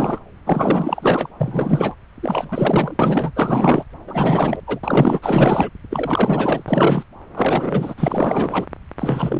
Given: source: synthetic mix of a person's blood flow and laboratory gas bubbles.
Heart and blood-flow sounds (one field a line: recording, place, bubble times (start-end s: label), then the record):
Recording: Doppler ultrasound of blood flow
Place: subclavian vein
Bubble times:
0.00-0.18 s: bubbles
0.46-1.29 s: bubbles
1.40-1.95 s: bubbles
2.23-3.32 s: bubbles
3.35-3.85 s: bubbles
4.07-4.60 s: bubbles
4.67-4.79 s: bubbles
4.83-5.19 s: bubbles
5.22-5.69 s: bubbles
5.90-7.03 s: bubbles
7.35-7.94 s: bubbles
7.97-8.66 s: bubbles
8.98-9.39 s: bubbles
From the record:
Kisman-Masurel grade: 444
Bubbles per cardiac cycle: continuous sound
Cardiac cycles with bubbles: 100%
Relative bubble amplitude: maximal (0.775 to 0.999)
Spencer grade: 4 (maximum detectable bubble signal sounding continuously throughout systole and diastole of every cardiac period, and overriding the amplitude of the normal cardiac signals)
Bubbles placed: anywhere in the cardiac cycle